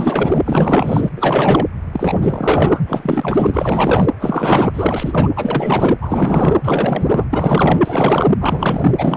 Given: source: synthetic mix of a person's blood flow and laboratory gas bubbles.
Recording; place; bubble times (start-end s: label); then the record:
Doppler ultrasound of blood flow; precordium
0.00-1.10 s: bubbles
1.15-1.68 s: bubbles
1.93-2.83 s: bubbles
2.87-4.07 s: bubbles
4.21-5.30 s: bubbles
5.36-5.97 s: bubbles
6.01-6.57 s: bubbles
6.64-7.25 s: bubbles
7.33-7.80 s: bubbles
7.84-8.30 s: bubbles
8.41-8.95 s: bubbles
8.98-9.17 s: bubbles
From the record:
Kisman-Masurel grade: 444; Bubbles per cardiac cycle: continuous sound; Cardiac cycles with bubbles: 100%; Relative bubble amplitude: maximal (0.775 to 0.999); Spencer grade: 4 (maximum detectable bubble signal sounding continuously throughout systole and diastole of every cardiac period, and overriding the amplitude of the normal cardiac signals); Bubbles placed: anywhere in the cardiac cycle